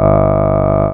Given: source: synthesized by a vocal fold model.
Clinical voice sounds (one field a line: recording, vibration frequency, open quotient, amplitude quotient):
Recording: sustained vowel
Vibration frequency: 50 Hz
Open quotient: 0.3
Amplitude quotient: 1.1